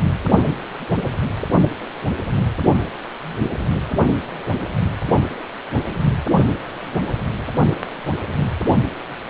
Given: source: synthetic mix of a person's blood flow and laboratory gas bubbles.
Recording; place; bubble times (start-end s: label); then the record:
Doppler ultrasound of blood flow; precordium
no bubbles
From the record:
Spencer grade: 0 (complete lack of bubble signals)